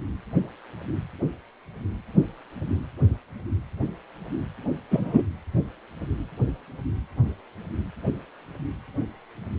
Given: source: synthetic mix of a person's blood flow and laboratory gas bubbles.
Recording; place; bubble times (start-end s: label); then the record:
Doppler ultrasound of blood flow; precordium
4.91-5.22 s: bubbles
From the record:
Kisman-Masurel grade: 113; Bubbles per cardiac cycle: 1 to 2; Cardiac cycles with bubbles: 1 to 10%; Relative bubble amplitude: loud (0.450 to 0.775); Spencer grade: 1 (occasional bubble signal discernible with the cardiac motion signal, with majority of cardiac periods free of bubbles); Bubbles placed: anywhere in the cardiac cycle